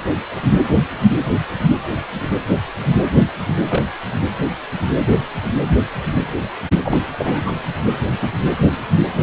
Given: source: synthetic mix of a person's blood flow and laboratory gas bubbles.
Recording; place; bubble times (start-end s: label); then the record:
Doppler ultrasound of blood flow; precordium
3.69-3.82 s: bubbles
6.84-6.97 s: bubbles
7.18-7.52 s: bubbles
8.21-8.30 s: bubbles
From the record:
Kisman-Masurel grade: 122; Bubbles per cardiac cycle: 1 to 2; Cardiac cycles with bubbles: 10 to 50%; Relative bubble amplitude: moderate (0.250 to 0.450); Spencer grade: 2 (many but less than half of the cardiac periods contain bubble signals, singularly or in groups); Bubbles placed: anywhere in the cardiac cycle